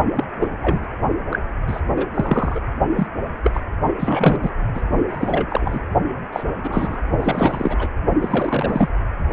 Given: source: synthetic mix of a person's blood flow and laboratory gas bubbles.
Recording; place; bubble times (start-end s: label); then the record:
Doppler ultrasound of blood flow; precordium
0.15-0.24 s: bubbles
0.40-0.48 s: bubbles
0.61-0.87 s: bubbles
1.30-1.39 s: bubbles
1.67-1.81 s: bubbles
1.96-2.06 s: bubbles
2.15-2.60 s: bubbles
2.95-3.07 s: bubbles
3.44-3.60 s: bubbles
3.99-4.50 s: bubbles
4.74-4.81 s: bubbles
5.07-5.46 s: bubbles
5.50-5.79 s: bubbles
6.32-6.43 s: bubbles
6.63-7.03 s: bubbles
7.18-7.88 s: bubbles
8.21-8.88 s: bubbles
From the record:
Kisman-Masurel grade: 232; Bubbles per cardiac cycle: several, 3 to 8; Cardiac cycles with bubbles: 50 to 99%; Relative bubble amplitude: moderate (0.250 to 0.450); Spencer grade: 3 (all of the cardiac periods contain showers or single bubble signals, but not dominating or overriding the cardiac motion signals); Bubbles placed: only in the low amplitude regions of the cardiac cycle